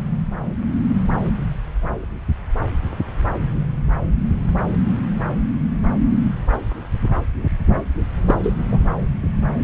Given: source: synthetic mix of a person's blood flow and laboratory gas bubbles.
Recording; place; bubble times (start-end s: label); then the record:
Doppler ultrasound of blood flow; subclavian vein
8.26-8.35 s: bubbles
8.43-8.53 s: bubbles
8.71-8.79 s: bubbles
From the record:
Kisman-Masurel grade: 213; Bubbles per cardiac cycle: several, 3 to 8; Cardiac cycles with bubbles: 1 to 10%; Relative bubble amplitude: loud (0.450 to 0.775); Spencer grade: 1 (occasional bubble signal discernible with the cardiac motion signal, with majority of cardiac periods free of bubbles); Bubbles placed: anywhere in the cardiac cycle